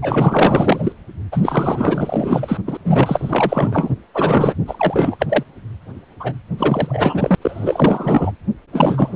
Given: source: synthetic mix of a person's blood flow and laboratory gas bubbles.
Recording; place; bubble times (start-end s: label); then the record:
Doppler ultrasound of blood flow; precordium
0.02-0.93 s: bubbles
1.31-2.58 s: bubbles
2.67-2.77 s: bubbles
2.84-3.95 s: bubbles
4.13-4.54 s: bubbles
4.65-5.17 s: bubbles
5.19-5.43 s: bubbles
6.19-6.33 s: bubbles
6.57-7.35 s: bubbles
7.42-8.32 s: bubbles
8.72-9.16 s: bubbles
From the record:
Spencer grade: 4 (maximum detectable bubble signal sounding continuously throughout systole and diastole of every cardiac period, and overriding the amplitude of the normal cardiac signals); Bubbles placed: anywhere in the cardiac cycle